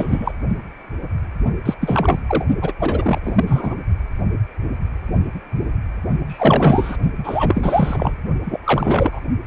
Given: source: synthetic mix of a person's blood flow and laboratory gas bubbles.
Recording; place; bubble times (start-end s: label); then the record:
Doppler ultrasound of blood flow; precordium
0.00-0.32 s: bubbles
1.65-1.75 s: bubbles
1.81-2.19 s: bubbles
2.28-2.45 s: bubbles
2.61-2.73 s: bubbles
2.79-3.19 s: bubbles
3.24-3.75 s: bubbles
6.28-6.97 s: bubbles
7.17-8.16 s: bubbles
8.44-8.59 s: bubbles
8.64-9.20 s: bubbles
From the record:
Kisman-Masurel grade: 333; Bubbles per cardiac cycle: rolling drumbeat, 9 or more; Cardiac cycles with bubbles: 50 to 99%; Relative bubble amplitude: loud (0.450 to 0.775); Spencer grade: 3 (all of the cardiac periods contain showers or single bubble signals, but not dominating or overriding the cardiac motion signals); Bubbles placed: only in the low amplitude regions of the cardiac cycle